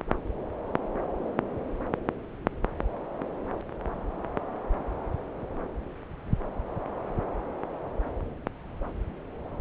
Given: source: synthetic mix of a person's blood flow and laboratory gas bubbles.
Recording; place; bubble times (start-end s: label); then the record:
Doppler ultrasound of blood flow; subclavian vein
no bubbles
From the record:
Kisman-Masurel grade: 000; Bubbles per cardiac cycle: 0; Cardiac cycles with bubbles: 0%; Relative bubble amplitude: no bubbles discernible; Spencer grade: 0 (complete lack of bubble signals)